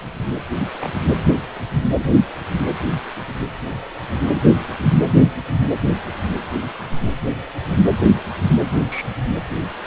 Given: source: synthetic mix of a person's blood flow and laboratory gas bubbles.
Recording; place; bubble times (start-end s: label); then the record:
Doppler ultrasound of blood flow; precordium
0.80-0.90 s: bubbles
8.67-9.12 s: bubbles
From the record:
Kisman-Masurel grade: 121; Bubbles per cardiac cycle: 1 to 2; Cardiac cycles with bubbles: 10 to 50%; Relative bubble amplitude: barely perceptible (0.100 to 0.250); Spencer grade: 2 (many but less than half of the cardiac periods contain bubble signals, singularly or in groups); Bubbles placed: anywhere in the cardiac cycle